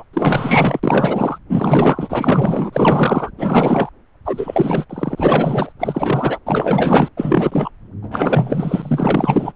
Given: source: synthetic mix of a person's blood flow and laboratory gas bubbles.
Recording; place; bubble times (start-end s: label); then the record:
Doppler ultrasound of blood flow; subclavian vein
0.00-0.04 s: bubbles
0.13-0.79 s: bubbles
0.83-1.38 s: bubbles
1.48-3.32 s: bubbles
3.37-3.89 s: bubbles
4.25-4.85 s: bubbles
4.90-5.73 s: bubbles
5.79-6.38 s: bubbles
6.46-7.08 s: bubbles
7.17-7.71 s: bubbles
8.02-9.52 s: bubbles
From the record:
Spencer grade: 4 (maximum detectable bubble signal sounding continuously throughout systole and diastole of every cardiac period, and overriding the amplitude of the normal cardiac signals); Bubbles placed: anywhere in the cardiac cycle